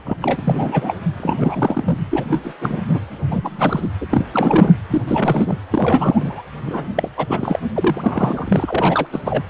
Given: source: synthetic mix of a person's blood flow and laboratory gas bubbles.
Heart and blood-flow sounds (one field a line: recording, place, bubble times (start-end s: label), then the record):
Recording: Doppler ultrasound of blood flow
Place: precordium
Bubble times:
0.05-0.17 s: bubbles
0.22-0.96 s: bubbles
1.19-1.98 s: bubbles
2.10-2.39 s: bubbles
2.44-2.53 s: bubbles
2.61-2.81 s: bubbles
2.88-2.99 s: bubbles
3.29-3.88 s: bubbles
4.01-4.06 s: bubbles
4.10-4.26 s: bubbles
4.33-4.75 s: bubbles
4.90-5.02 s: bubbles
5.08-5.58 s: bubbles
5.71-6.43 s: bubbles
6.66-6.89 s: bubbles
6.95-7.08 s: bubbles
7.17-7.60 s: bubbles
7.74-9.07 s: bubbles
9.12-9.21 s: bubbles
9.24-9.43 s: bubbles
From the record:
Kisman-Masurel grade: 342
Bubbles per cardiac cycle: rolling drumbeat, 9 or more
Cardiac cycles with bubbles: 100%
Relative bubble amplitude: moderate (0.250 to 0.450)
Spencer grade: 3 (all of the cardiac periods contain showers or single bubble signals, but not dominating or overriding the cardiac motion signals)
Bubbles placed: anywhere in the cardiac cycle